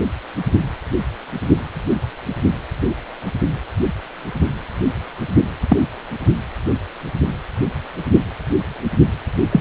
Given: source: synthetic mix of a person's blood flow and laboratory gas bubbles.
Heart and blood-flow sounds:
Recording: Doppler ultrasound of blood flow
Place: precordium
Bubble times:
5.68-5.77 s: bubbles
9.51-9.60 s: bubbles
From the record:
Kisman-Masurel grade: 123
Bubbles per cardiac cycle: 1 to 2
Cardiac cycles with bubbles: 10 to 50%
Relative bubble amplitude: loud (0.450 to 0.775)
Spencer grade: 2 (many but less than half of the cardiac periods contain bubble signals, singularly or in groups)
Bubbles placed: only in the low amplitude regions of the cardiac cycle

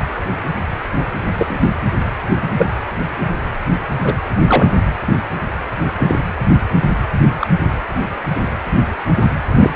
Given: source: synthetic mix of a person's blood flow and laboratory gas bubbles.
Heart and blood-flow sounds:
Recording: Doppler ultrasound of blood flow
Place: precordium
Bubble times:
1.39-1.58 s: bubbles
2.42-2.67 s: bubbles
4.04-4.14 s: bubbles
4.47-4.68 s: bubbles
5.98-6.20 s: bubbles
7.41-7.47 s: bubbles
9.55-9.70 s: bubbles
From the record:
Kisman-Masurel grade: 123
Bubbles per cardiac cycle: 1 to 2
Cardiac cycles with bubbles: 10 to 50%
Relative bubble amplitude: loud (0.450 to 0.775)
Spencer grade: 2 (many but less than half of the cardiac periods contain bubble signals, singularly or in groups)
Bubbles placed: anywhere in the cardiac cycle

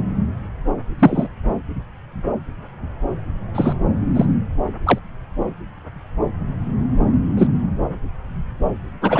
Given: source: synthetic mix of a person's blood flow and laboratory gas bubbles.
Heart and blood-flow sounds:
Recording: Doppler ultrasound of blood flow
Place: subclavian vein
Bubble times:
0.99-1.28 s: bubbles
3.54-3.73 s: bubbles
4.14-4.25 s: bubbles
4.86-4.99 s: bubbles
7.37-7.47 s: bubbles
9.01-9.20 s: bubbles
From the record:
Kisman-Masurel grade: 123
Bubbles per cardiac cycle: 1 to 2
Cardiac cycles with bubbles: 10 to 50%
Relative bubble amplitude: loud (0.450 to 0.775)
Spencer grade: 2 (many but less than half of the cardiac periods contain bubble signals, singularly or in groups)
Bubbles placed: anywhere in the cardiac cycle

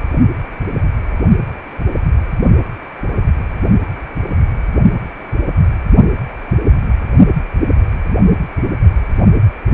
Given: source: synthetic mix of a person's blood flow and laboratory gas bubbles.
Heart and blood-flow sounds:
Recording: Doppler ultrasound of blood flow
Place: precordium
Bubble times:
9.34-9.38 s: bubbles
From the record:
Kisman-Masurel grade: 111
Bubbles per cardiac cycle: 1 to 2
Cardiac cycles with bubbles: 1 to 10%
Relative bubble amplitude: barely perceptible (0.100 to 0.250)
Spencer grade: 1 (occasional bubble signal discernible with the cardiac motion signal, with majority of cardiac periods free of bubbles)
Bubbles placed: only in the low amplitude regions of the cardiac cycle

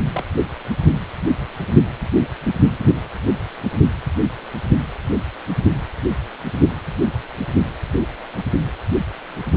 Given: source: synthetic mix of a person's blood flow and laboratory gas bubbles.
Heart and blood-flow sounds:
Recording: Doppler ultrasound of blood flow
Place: precordium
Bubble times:
0.13-0.23 s: bubbles
From the record:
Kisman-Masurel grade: 212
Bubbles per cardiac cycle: several, 3 to 8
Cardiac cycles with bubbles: 1 to 10%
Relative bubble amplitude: moderate (0.250 to 0.450)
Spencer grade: 1 (occasional bubble signal discernible with the cardiac motion signal, with majority of cardiac periods free of bubbles)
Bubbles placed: only in the low amplitude regions of the cardiac cycle

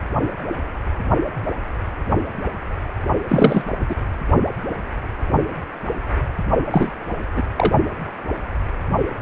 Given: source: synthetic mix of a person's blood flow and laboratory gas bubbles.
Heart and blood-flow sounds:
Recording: Doppler ultrasound of blood flow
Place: precordium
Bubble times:
3.28-3.65 s: bubbles
3.88-3.96 s: bubbles
6.71-6.92 s: bubbles
7.36-7.42 s: bubbles
7.58-7.73 s: bubbles
From the record:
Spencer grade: 2 (many but less than half of the cardiac periods contain bubble signals, singularly or in groups)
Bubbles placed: only in the low amplitude regions of the cardiac cycle

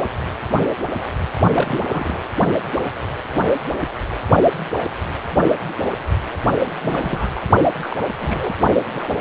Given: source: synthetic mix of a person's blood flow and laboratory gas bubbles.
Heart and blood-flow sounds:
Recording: Doppler ultrasound of blood flow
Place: precordium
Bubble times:
1.53-1.85 s: bubbles
1.89-2.21 s: bubbles
6.66-6.71 s: bubbles
6.81-7.44 s: bubbles
7.81-7.97 s: bubbles
8.21-8.56 s: bubbles
8.92-9.21 s: bubbles
From the record:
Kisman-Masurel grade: 221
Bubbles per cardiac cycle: several, 3 to 8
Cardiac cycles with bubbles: 10 to 50%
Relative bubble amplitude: barely perceptible (0.100 to 0.250)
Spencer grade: 2 (many but less than half of the cardiac periods contain bubble signals, singularly or in groups)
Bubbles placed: only in the low amplitude regions of the cardiac cycle

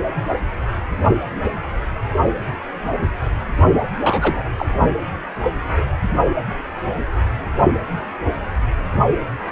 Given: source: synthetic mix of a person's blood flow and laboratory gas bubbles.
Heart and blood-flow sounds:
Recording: Doppler ultrasound of blood flow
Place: precordium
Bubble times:
4.03-4.45 s: bubbles
4.58-4.67 s: bubbles
From the record:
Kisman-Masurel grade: 212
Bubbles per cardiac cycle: several, 3 to 8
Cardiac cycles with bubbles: 1 to 10%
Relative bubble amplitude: moderate (0.250 to 0.450)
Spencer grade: 1 (occasional bubble signal discernible with the cardiac motion signal, with majority of cardiac periods free of bubbles)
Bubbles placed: only in the low amplitude regions of the cardiac cycle

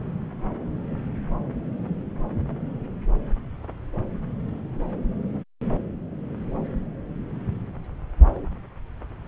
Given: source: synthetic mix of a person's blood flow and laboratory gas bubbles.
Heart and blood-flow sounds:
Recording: Doppler ultrasound of blood flow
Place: subclavian vein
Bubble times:
no bubbles
From the record:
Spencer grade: 0 (complete lack of bubble signals)

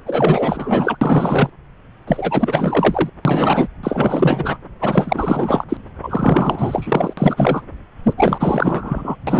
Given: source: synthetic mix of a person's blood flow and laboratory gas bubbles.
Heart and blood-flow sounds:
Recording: Doppler ultrasound of blood flow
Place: subclavian vein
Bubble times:
0.05-0.97 s: bubbles
1.01-1.50 s: bubbles
2.07-3.09 s: bubbles
3.25-3.68 s: bubbles
3.83-4.57 s: bubbles
4.81-5.64 s: bubbles
5.69-5.77 s: bubbles
6.02-7.14 s: bubbles
7.17-7.62 s: bubbles
8.04-8.13 s: bubbles
8.17-9.15 s: bubbles
9.27-9.40 s: bubbles
From the record:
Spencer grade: 4 (maximum detectable bubble signal sounding continuously throughout systole and diastole of every cardiac period, and overriding the amplitude of the normal cardiac signals)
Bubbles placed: anywhere in the cardiac cycle

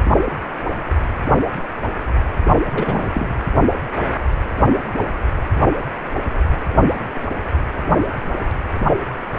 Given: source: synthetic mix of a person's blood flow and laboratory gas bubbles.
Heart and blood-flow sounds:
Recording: Doppler ultrasound of blood flow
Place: precordium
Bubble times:
2.75-3.07 s: bubbles
3.14-3.30 s: bubbles
From the record:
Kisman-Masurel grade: 212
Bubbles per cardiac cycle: several, 3 to 8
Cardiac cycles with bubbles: 1 to 10%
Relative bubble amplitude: moderate (0.250 to 0.450)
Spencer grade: 1 (occasional bubble signal discernible with the cardiac motion signal, with majority of cardiac periods free of bubbles)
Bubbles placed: anywhere in the cardiac cycle

